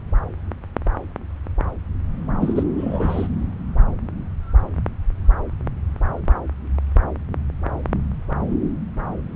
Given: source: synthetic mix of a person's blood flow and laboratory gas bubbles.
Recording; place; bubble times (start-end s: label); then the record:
Doppler ultrasound of blood flow; subclavian vein
2.40-2.63 s: bubbles
2.77-3.27 s: bubbles
From the record:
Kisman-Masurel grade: 212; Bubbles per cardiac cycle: several, 3 to 8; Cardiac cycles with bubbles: 1 to 10%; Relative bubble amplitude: moderate (0.250 to 0.450); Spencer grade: 1 (occasional bubble signal discernible with the cardiac motion signal, with majority of cardiac periods free of bubbles); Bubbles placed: anywhere in the cardiac cycle